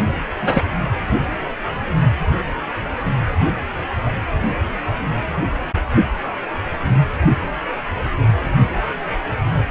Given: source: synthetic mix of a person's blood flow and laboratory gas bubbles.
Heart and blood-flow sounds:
Doppler ultrasound of blood flow; precordium
0.42-0.64 s: bubbles
From the record:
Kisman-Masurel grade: 113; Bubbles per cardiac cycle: 1 to 2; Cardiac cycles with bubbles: 1 to 10%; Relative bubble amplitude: loud (0.450 to 0.775); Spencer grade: 1 (occasional bubble signal discernible with the cardiac motion signal, with majority of cardiac periods free of bubbles); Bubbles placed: only in the low amplitude regions of the cardiac cycle

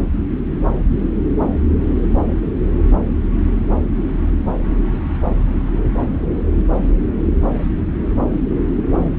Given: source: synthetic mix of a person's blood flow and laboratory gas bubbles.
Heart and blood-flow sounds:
Doppler ultrasound of blood flow; subclavian vein
no bubbles
From the record:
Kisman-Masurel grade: 000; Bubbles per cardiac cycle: 0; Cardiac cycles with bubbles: 0%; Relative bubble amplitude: no bubbles discernible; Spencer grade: 0 (complete lack of bubble signals)

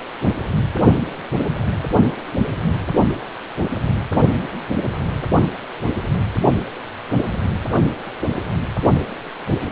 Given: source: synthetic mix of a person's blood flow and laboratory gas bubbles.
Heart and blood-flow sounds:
Doppler ultrasound of blood flow; precordium
no bubbles
From the record:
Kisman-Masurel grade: 000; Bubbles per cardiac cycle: 0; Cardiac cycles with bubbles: 0%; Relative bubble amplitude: no bubbles discernible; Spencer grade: 0 (complete lack of bubble signals)

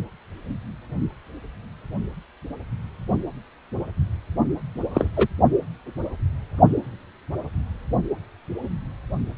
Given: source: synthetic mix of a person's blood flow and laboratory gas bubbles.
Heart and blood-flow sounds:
Doppler ultrasound of blood flow; precordium
4.94-5.09 s: bubbles
5.17-5.28 s: bubbles
From the record:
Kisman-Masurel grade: 112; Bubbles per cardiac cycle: 1 to 2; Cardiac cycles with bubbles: 1 to 10%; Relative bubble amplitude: moderate (0.250 to 0.450); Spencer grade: 1 (occasional bubble signal discernible with the cardiac motion signal, with majority of cardiac periods free of bubbles); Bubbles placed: only in the low amplitude regions of the cardiac cycle

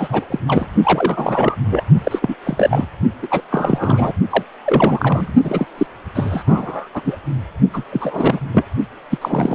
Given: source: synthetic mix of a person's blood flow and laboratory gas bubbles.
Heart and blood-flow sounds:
Doppler ultrasound of blood flow; precordium
0.00-0.25 s: bubbles
0.30-0.40 s: bubbles
0.48-0.67 s: bubbles
0.83-1.55 s: bubbles
1.70-1.83 s: bubbles
2.04-2.19 s: bubbles
2.22-2.35 s: bubbles
2.44-2.87 s: bubbles
3.22-3.28 s: bubbles
3.30-3.42 s: bubbles
3.51-4.12 s: bubbles
4.29-4.43 s: bubbles
4.66-5.33 s: bubbles
5.44-5.66 s: bubbles
5.78-5.87 s: bubbles
6.15-6.43 s: bubbles
6.46-6.89 s: bubbles
6.95-7.02 s: bubbles
7.04-7.18 s: bubbles
7.73-7.83 s: bubbles
7.92-8.39 s: bubbles
8.54-8.65 s: bubbles
9.10-9.18 s: bubbles
9.21-9.55 s: bubbles
From the record:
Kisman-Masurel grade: 343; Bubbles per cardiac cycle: rolling drumbeat, 9 or more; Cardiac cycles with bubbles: 100%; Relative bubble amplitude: loud (0.450 to 0.775); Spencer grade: 3 (all of the cardiac periods contain showers or single bubble signals, but not dominating or overriding the cardiac motion signals); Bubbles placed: only in the low amplitude regions of the cardiac cycle

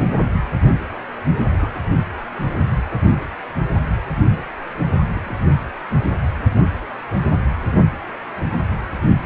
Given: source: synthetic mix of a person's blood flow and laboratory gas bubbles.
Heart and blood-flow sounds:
Doppler ultrasound of blood flow; precordium
1.52-1.80 s: bubbles
5.15-5.46 s: bubbles
From the record:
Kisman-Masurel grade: 121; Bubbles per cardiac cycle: 1 to 2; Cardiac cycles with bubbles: 10 to 50%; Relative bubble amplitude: barely perceptible (0.100 to 0.250); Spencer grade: 2 (many but less than half of the cardiac periods contain bubble signals, singularly or in groups); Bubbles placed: anywhere in the cardiac cycle

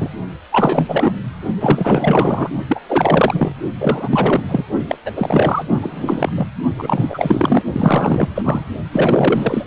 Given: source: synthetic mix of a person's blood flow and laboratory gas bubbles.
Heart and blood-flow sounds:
Doppler ultrasound of blood flow; precordium
0.00-0.09 s: bubbles
0.52-1.12 s: bubbles
1.59-2.50 s: bubbles
2.69-2.80 s: bubbles
2.88-3.52 s: bubbles
3.78-4.43 s: bubbles
4.48-4.64 s: bubbles
4.88-4.97 s: bubbles
5.05-5.11 s: bubbles
5.16-5.64 s: bubbles
5.68-6.31 s: bubbles
6.35-6.46 s: bubbles
6.76-7.62 s: bubbles
7.72-8.29 s: bubbles
8.35-8.65 s: bubbles
8.92-9.64 s: bubbles
From the record:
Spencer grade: 4 (maximum detectable bubble signal sounding continuously throughout systole and diastole of every cardiac period, and overriding the amplitude of the normal cardiac signals); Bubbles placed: only in the low amplitude regions of the cardiac cycle

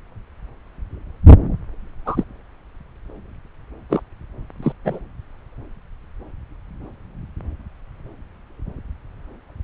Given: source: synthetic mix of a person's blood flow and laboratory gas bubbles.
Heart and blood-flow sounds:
Doppler ultrasound of blood flow; subclavian vein
2.05-2.24 s: bubbles
3.90-4.02 s: bubbles
4.62-4.72 s: bubbles
4.84-5.00 s: bubbles
From the record:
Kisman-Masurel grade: 123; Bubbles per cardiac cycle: 1 to 2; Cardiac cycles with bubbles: 10 to 50%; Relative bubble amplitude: loud (0.450 to 0.775); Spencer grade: 2 (many but less than half of the cardiac periods contain bubble signals, singularly or in groups); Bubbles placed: anywhere in the cardiac cycle

